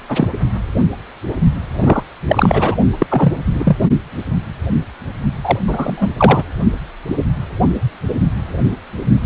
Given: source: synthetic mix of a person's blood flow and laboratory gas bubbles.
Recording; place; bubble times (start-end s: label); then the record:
Doppler ultrasound of blood flow; precordium
0.08-0.28 s: bubbles
1.80-2.03 s: bubbles
2.27-2.75 s: bubbles
2.99-3.06 s: bubbles
3.09-3.33 s: bubbles
3.53-3.76 s: bubbles
5.43-5.58 s: bubbles
5.67-6.12 s: bubbles
6.17-6.43 s: bubbles
9.23-9.26 s: bubbles
From the record:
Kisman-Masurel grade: 223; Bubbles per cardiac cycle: several, 3 to 8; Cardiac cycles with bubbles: 10 to 50%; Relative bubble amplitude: loud (0.450 to 0.775); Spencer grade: 2 (many but less than half of the cardiac periods contain bubble signals, singularly or in groups); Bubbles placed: only in the low amplitude regions of the cardiac cycle